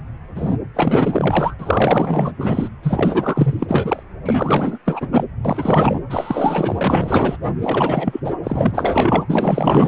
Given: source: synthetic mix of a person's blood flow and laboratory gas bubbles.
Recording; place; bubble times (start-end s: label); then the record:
Doppler ultrasound of blood flow; precordium
0.35-0.55 s: bubbles
0.74-1.54 s: bubbles
1.59-2.32 s: bubbles
2.38-2.69 s: bubbles
2.83-4.03 s: bubbles
4.25-4.79 s: bubbles
4.86-5.08 s: bubbles
5.12-5.25 s: bubbles
5.45-6.00 s: bubbles
6.09-7.37 s: bubbles
7.61-8.20 s: bubbles
8.24-8.34 s: bubbles
8.43-9.24 s: bubbles
9.29-9.88 s: bubbles
From the record:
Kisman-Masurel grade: 444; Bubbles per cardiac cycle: continuous sound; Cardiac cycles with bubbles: 100%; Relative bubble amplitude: maximal (0.775 to 0.999); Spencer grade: 4 (maximum detectable bubble signal sounding continuously throughout systole and diastole of every cardiac period, and overriding the amplitude of the normal cardiac signals); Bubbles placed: anywhere in the cardiac cycle